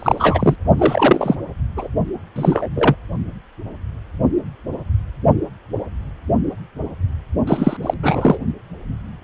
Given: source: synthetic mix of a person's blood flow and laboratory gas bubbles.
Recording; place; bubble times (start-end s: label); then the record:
Doppler ultrasound of blood flow; precordium
0.00-0.56 s: bubbles
0.78-1.35 s: bubbles
1.77-1.88 s: bubbles
2.35-2.67 s: bubbles
2.75-2.95 s: bubbles
7.47-7.77 s: bubbles
7.82-7.94 s: bubbles
8.03-8.38 s: bubbles
From the record:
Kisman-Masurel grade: 223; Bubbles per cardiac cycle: several, 3 to 8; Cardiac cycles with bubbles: 10 to 50%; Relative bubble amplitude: loud (0.450 to 0.775); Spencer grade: 2 (many but less than half of the cardiac periods contain bubble signals, singularly or in groups); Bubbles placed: only in the low amplitude regions of the cardiac cycle